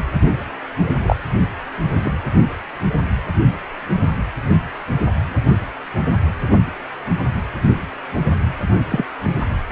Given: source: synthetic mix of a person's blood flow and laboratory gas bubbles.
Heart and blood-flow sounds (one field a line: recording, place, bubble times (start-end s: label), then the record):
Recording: Doppler ultrasound of blood flow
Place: precordium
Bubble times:
1.03-1.16 s: bubbles
2.02-2.12 s: bubbles
8.91-9.05 s: bubbles
9.70-9.72 s: bubbles
From the record:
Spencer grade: 2 (many but less than half of the cardiac periods contain bubble signals, singularly or in groups)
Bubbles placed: only in the low amplitude regions of the cardiac cycle